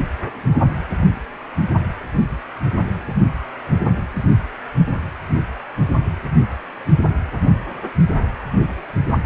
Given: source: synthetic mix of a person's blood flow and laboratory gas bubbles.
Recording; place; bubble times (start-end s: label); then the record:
Doppler ultrasound of blood flow; precordium
no bubbles
From the record:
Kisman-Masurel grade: 000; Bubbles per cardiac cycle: 0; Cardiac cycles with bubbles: 0%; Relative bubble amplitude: no bubbles discernible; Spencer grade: 0 (complete lack of bubble signals)